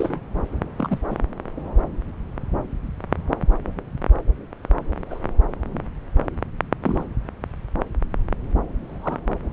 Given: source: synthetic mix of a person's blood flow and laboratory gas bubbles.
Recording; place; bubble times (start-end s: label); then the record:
Doppler ultrasound of blood flow; subclavian vein
0.00-0.19 s: bubbles
0.76-0.98 s: bubbles
1.10-1.17 s: bubbles
5.10-5.19 s: bubbles
6.82-7.04 s: bubbles
8.84-9.20 s: bubbles
From the record:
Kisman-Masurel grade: 121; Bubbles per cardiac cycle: 1 to 2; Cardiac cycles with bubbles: 10 to 50%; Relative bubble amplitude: barely perceptible (0.100 to 0.250); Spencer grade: 2 (many but less than half of the cardiac periods contain bubble signals, singularly or in groups); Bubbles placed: anywhere in the cardiac cycle